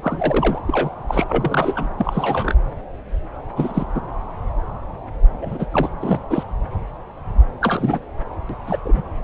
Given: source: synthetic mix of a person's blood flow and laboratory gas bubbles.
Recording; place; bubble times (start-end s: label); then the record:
Doppler ultrasound of blood flow; subclavian vein
0.02-0.61 s: bubbles
0.67-0.95 s: bubbles
1.08-1.24 s: bubbles
1.29-1.89 s: bubbles
1.98-2.54 s: bubbles
3.55-3.85 s: bubbles
3.94-4.01 s: bubbles
5.42-5.66 s: bubbles
5.72-5.88 s: bubbles
6.00-6.21 s: bubbles
6.29-6.43 s: bubbles
7.62-7.99 s: bubbles
8.49-8.55 s: bubbles
8.67-8.77 s: bubbles
8.85-9.02 s: bubbles
From the record:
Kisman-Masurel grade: 232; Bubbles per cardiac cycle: several, 3 to 8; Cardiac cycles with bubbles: 50 to 99%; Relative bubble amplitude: moderate (0.250 to 0.450); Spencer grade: 3 (all of the cardiac periods contain showers or single bubble signals, but not dominating or overriding the cardiac motion signals); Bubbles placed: anywhere in the cardiac cycle